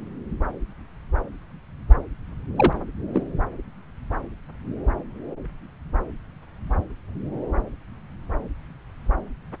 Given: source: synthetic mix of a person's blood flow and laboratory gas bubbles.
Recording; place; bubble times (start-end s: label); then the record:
Doppler ultrasound of blood flow; subclavian vein
2.56-2.73 s: bubbles
3.13-3.22 s: bubbles
From the record:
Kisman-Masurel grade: 112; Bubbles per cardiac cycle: 1 to 2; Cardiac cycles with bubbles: 1 to 10%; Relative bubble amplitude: moderate (0.250 to 0.450); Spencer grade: 1 (occasional bubble signal discernible with the cardiac motion signal, with majority of cardiac periods free of bubbles); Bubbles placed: anywhere in the cardiac cycle